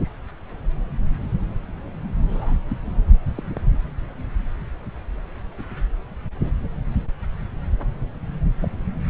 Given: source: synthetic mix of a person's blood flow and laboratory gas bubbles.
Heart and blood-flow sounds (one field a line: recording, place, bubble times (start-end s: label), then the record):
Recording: Doppler ultrasound of blood flow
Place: subclavian vein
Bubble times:
2.29-2.55 s: bubbles
2.68-2.76 s: bubbles
3.35-3.43 s: bubbles
3.53-3.60 s: bubbles
8.62-8.70 s: bubbles
From the record:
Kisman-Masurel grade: 121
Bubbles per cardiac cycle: 1 to 2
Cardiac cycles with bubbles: 10 to 50%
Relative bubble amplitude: barely perceptible (0.100 to 0.250)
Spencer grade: 2 (many but less than half of the cardiac periods contain bubble signals, singularly or in groups)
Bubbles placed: anywhere in the cardiac cycle